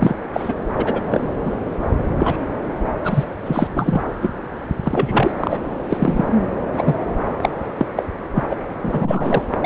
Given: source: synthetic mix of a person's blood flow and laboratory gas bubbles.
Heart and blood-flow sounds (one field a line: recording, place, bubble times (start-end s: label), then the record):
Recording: Doppler ultrasound of blood flow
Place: subclavian vein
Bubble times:
0.00-0.15 s: bubbles
0.33-0.56 s: bubbles
0.77-1.00 s: bubbles
1.03-1.32 s: bubbles
1.46-1.52 s: bubbles
2.19-2.38 s: bubbles
3.04-3.25 s: bubbles
3.45-4.07 s: bubbles
4.21-4.30 s: bubbles
4.83-5.33 s: bubbles
5.37-5.58 s: bubbles
5.90-5.97 s: bubbles
6.00-6.34 s: bubbles
6.75-6.96 s: bubbles
7.42-7.50 s: bubbles
7.76-7.87 s: bubbles
7.95-8.04 s: bubbles
8.35-8.44 s: bubbles
8.50-8.55 s: bubbles
8.82-9.43 s: bubbles
9.60-9.66 s: bubbles
From the record:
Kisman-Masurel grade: 243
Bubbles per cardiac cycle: several, 3 to 8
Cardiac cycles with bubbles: 100%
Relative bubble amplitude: loud (0.450 to 0.775)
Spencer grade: 3 (all of the cardiac periods contain showers or single bubble signals, but not dominating or overriding the cardiac motion signals)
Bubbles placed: anywhere in the cardiac cycle